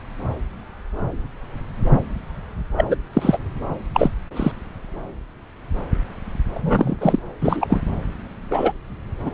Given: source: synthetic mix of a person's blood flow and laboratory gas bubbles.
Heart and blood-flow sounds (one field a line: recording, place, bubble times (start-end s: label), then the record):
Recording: Doppler ultrasound of blood flow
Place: subclavian vein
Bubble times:
2.77-2.85 s: bubbles
2.88-2.96 s: bubbles
3.13-3.38 s: bubbles
3.94-4.11 s: bubbles
4.36-4.51 s: bubbles
6.54-6.97 s: bubbles
7.00-7.19 s: bubbles
7.41-7.80 s: bubbles
8.51-8.72 s: bubbles
9.22-9.31 s: bubbles
From the record:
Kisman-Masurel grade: 233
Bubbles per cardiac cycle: several, 3 to 8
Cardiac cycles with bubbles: 50 to 99%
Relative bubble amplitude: loud (0.450 to 0.775)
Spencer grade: 3 (all of the cardiac periods contain showers or single bubble signals, but not dominating or overriding the cardiac motion signals)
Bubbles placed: anywhere in the cardiac cycle